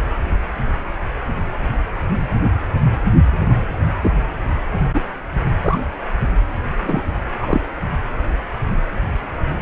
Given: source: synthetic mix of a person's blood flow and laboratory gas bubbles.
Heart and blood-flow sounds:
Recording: Doppler ultrasound of blood flow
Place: precordium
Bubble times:
3.48-3.65 s: bubbles
4.02-4.11 s: bubbles
4.94-5.01 s: bubbles
5.64-5.79 s: bubbles
6.80-7.03 s: bubbles
7.41-7.61 s: bubbles
From the record:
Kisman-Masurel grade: 122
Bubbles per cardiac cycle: 1 to 2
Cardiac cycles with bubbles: 10 to 50%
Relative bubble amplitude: moderate (0.250 to 0.450)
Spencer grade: 2 (many but less than half of the cardiac periods contain bubble signals, singularly or in groups)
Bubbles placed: anywhere in the cardiac cycle

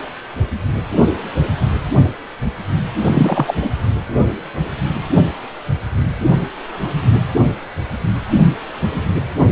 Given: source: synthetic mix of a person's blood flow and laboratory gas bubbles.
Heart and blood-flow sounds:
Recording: Doppler ultrasound of blood flow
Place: precordium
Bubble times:
3.05-3.54 s: bubbles
3.61-3.70 s: bubbles
From the record:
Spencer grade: 1 (occasional bubble signal discernible with the cardiac motion signal, with majority of cardiac periods free of bubbles)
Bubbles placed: anywhere in the cardiac cycle

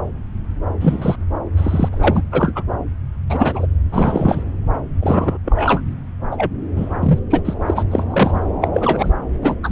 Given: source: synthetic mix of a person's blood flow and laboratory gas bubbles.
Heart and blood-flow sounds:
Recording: Doppler ultrasound of blood flow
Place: subclavian vein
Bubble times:
0.80-1.16 s: bubbles
1.57-1.89 s: bubbles
1.92-2.23 s: bubbles
2.32-2.52 s: bubbles
2.55-2.63 s: bubbles
3.29-3.67 s: bubbles
3.92-4.43 s: bubbles
5.00-5.38 s: bubbles
5.45-5.81 s: bubbles
6.31-6.51 s: bubbles
6.75-6.99 s: bubbles
7.02-7.19 s: bubbles
7.30-7.42 s: bubbles
7.45-7.54 s: bubbles
7.66-7.83 s: bubbles
7.91-8.04 s: bubbles
8.10-8.52 s: bubbles
8.62-8.68 s: bubbles
8.74-9.14 s: bubbles
9.42-9.55 s: bubbles
9.63-9.71 s: bubbles
From the record:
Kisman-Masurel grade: 233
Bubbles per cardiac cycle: several, 3 to 8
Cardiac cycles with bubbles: 50 to 99%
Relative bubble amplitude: loud (0.450 to 0.775)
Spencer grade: 3 (all of the cardiac periods contain showers or single bubble signals, but not dominating or overriding the cardiac motion signals)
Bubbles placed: anywhere in the cardiac cycle

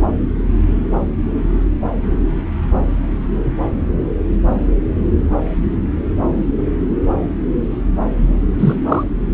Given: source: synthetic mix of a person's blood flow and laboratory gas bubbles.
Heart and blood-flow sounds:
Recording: Doppler ultrasound of blood flow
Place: subclavian vein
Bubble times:
8.59-8.75 s: bubbles
8.88-9.03 s: bubbles
From the record:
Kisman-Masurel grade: 113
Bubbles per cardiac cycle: 1 to 2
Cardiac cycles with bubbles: 1 to 10%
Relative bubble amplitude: loud (0.450 to 0.775)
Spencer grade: 1 (occasional bubble signal discernible with the cardiac motion signal, with majority of cardiac periods free of bubbles)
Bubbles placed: anywhere in the cardiac cycle

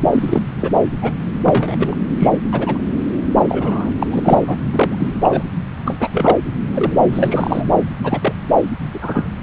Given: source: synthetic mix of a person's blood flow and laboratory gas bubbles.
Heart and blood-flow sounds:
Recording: Doppler ultrasound of blood flow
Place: subclavian vein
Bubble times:
0.12-0.42 s: bubbles
0.57-0.70 s: bubbles
1.02-1.12 s: bubbles
1.44-1.96 s: bubbles
2.19-2.29 s: bubbles
2.52-2.78 s: bubbles
3.48-3.90 s: bubbles
3.99-4.06 s: bubbles
4.11-4.20 s: bubbles
4.22-4.57 s: bubbles
4.72-4.95 s: bubbles
4.98-5.09 s: bubbles
5.21-5.44 s: bubbles
5.85-5.96 s: bubbles
5.99-6.07 s: bubbles
6.11-6.37 s: bubbles
6.73-6.95 s: bubbles
7.12-7.65 s: bubbles
8.04-8.33 s: bubbles
8.93-8.99 s: bubbles
9.01-9.29 s: bubbles
From the record:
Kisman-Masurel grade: 243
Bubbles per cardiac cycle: several, 3 to 8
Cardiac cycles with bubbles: 100%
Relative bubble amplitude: loud (0.450 to 0.775)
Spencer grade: 3 (all of the cardiac periods contain showers or single bubble signals, but not dominating or overriding the cardiac motion signals)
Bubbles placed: anywhere in the cardiac cycle

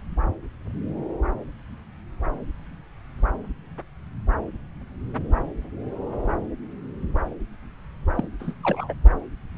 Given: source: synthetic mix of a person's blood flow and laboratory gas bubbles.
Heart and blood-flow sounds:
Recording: Doppler ultrasound of blood flow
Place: subclavian vein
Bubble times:
8.17-8.28 s: bubbles
8.40-8.54 s: bubbles
8.63-8.94 s: bubbles
From the record:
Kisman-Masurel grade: 221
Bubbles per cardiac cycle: several, 3 to 8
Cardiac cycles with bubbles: 10 to 50%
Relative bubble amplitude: barely perceptible (0.100 to 0.250)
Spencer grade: 2 (many but less than half of the cardiac periods contain bubble signals, singularly or in groups)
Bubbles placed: anywhere in the cardiac cycle

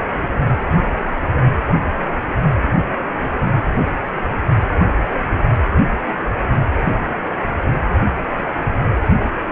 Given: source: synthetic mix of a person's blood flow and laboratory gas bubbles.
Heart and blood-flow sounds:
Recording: Doppler ultrasound of blood flow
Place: precordium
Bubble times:
0.14-0.25 s: bubbles
From the record:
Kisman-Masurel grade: 111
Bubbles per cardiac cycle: 1 to 2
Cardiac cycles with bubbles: 1 to 10%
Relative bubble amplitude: barely perceptible (0.100 to 0.250)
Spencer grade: 1 (occasional bubble signal discernible with the cardiac motion signal, with majority of cardiac periods free of bubbles)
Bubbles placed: anywhere in the cardiac cycle

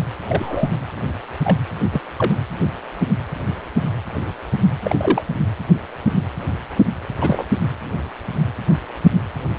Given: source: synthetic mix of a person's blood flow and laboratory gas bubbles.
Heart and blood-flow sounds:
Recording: Doppler ultrasound of blood flow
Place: precordium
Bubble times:
0.27-0.69 s: bubbles
1.44-1.58 s: bubbles
1.92-2.00 s: bubbles
2.17-2.35 s: bubbles
4.83-5.22 s: bubbles
7.21-7.45 s: bubbles
From the record:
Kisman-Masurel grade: 122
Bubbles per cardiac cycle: 1 to 2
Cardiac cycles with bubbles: 10 to 50%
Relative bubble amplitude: moderate (0.250 to 0.450)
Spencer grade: 2 (many but less than half of the cardiac periods contain bubble signals, singularly or in groups)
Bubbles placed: anywhere in the cardiac cycle

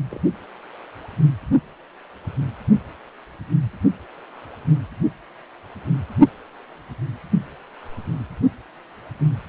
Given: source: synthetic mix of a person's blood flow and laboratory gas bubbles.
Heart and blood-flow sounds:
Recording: Doppler ultrasound of blood flow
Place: precordium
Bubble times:
0.10-0.21 s: bubbles
From the record:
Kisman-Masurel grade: 111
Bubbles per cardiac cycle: 1 to 2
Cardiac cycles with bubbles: 1 to 10%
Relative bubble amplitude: barely perceptible (0.100 to 0.250)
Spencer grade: 1 (occasional bubble signal discernible with the cardiac motion signal, with majority of cardiac periods free of bubbles)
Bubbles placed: anywhere in the cardiac cycle

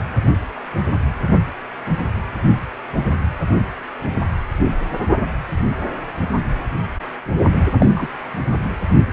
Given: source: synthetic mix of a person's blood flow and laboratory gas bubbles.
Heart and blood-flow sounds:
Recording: Doppler ultrasound of blood flow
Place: precordium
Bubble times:
7.79-8.07 s: bubbles
From the record:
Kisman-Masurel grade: 113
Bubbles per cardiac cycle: 1 to 2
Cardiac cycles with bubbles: 1 to 10%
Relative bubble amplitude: loud (0.450 to 0.775)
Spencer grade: 1 (occasional bubble signal discernible with the cardiac motion signal, with majority of cardiac periods free of bubbles)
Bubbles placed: only in the low amplitude regions of the cardiac cycle

